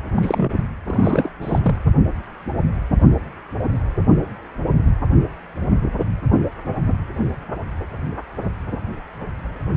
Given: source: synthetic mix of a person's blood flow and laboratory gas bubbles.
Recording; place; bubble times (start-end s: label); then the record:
Doppler ultrasound of blood flow; precordium
0.15-0.51 s: bubbles
0.84-1.31 s: bubbles
1.41-1.76 s: bubbles
From the record:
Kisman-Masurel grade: 222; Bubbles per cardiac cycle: several, 3 to 8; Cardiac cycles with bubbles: 10 to 50%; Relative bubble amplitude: moderate (0.250 to 0.450); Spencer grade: 2 (many but less than half of the cardiac periods contain bubble signals, singularly or in groups); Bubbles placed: only in the low amplitude regions of the cardiac cycle